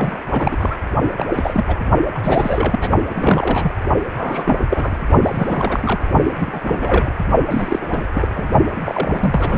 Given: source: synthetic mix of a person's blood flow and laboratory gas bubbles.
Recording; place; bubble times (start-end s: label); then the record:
Doppler ultrasound of blood flow; precordium
0.00-0.17 s: bubbles
0.29-0.77 s: bubbles
1.17-1.27 s: bubbles
1.30-1.65 s: bubbles
1.68-1.76 s: bubbles
2.15-2.19 s: bubbles
2.23-2.88 s: bubbles
3.09-3.71 s: bubbles
4.17-4.63 s: bubbles
4.69-5.03 s: bubbles
5.22-6.01 s: bubbles
6.23-6.34 s: bubbles
6.38-7.11 s: bubbles
7.50-8.05 s: bubbles
8.14-8.52 s: bubbles
8.75-9.58 s: bubbles
From the record:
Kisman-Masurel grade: 342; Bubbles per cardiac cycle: rolling drumbeat, 9 or more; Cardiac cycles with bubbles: 100%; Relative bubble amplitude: moderate (0.250 to 0.450); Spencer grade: 3 (all of the cardiac periods contain showers or single bubble signals, but not dominating or overriding the cardiac motion signals); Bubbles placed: only in the low amplitude regions of the cardiac cycle